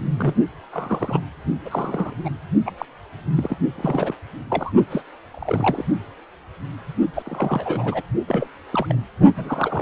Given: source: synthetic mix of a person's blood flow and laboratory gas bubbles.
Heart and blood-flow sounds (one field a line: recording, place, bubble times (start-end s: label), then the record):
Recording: Doppler ultrasound of blood flow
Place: precordium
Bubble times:
0.17-0.35 s: bubbles
0.72-1.19 s: bubbles
1.65-2.14 s: bubbles
2.25-2.29 s: bubbles
2.66-2.72 s: bubbles
2.78-2.85 s: bubbles
3.33-3.58 s: bubbles
3.75-4.15 s: bubbles
4.50-4.73 s: bubbles
4.90-5.01 s: bubbles
5.34-5.83 s: bubbles
7.13-8.02 s: bubbles
8.27-8.47 s: bubbles
8.72-8.96 s: bubbles
9.36-9.82 s: bubbles
From the record:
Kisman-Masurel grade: 232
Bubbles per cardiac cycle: several, 3 to 8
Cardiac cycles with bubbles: 50 to 99%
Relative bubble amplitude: moderate (0.250 to 0.450)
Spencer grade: 3 (all of the cardiac periods contain showers or single bubble signals, but not dominating or overriding the cardiac motion signals)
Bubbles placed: only in the low amplitude regions of the cardiac cycle